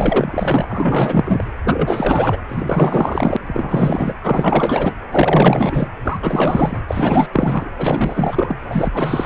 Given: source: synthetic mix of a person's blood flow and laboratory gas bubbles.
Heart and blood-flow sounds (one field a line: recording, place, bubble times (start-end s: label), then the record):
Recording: Doppler ultrasound of blood flow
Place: precordium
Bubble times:
0.00-1.46 s: bubbles
1.64-2.41 s: bubbles
2.48-3.37 s: bubbles
3.46-4.13 s: bubbles
4.23-4.93 s: bubbles
5.11-5.88 s: bubbles
6.04-6.19 s: bubbles
6.21-6.81 s: bubbles
6.88-7.27 s: bubbles
7.32-7.71 s: bubbles
7.76-8.56 s: bubbles
8.62-8.90 s: bubbles
8.94-9.26 s: bubbles
From the record:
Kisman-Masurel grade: 444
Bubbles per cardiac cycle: continuous sound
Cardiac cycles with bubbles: 100%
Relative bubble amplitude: maximal (0.775 to 0.999)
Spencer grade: 4 (maximum detectable bubble signal sounding continuously throughout systole and diastole of every cardiac period, and overriding the amplitude of the normal cardiac signals)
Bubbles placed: anywhere in the cardiac cycle